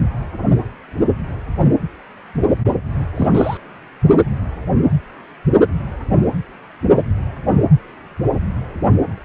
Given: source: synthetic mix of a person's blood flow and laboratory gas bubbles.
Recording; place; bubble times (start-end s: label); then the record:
Doppler ultrasound of blood flow; precordium
2.65-2.73 s: bubbles
3.14-3.58 s: bubbles
From the record:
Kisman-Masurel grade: 212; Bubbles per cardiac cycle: several, 3 to 8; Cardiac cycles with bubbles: 1 to 10%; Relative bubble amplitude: moderate (0.250 to 0.450); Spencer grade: 1 (occasional bubble signal discernible with the cardiac motion signal, with majority of cardiac periods free of bubbles); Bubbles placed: anywhere in the cardiac cycle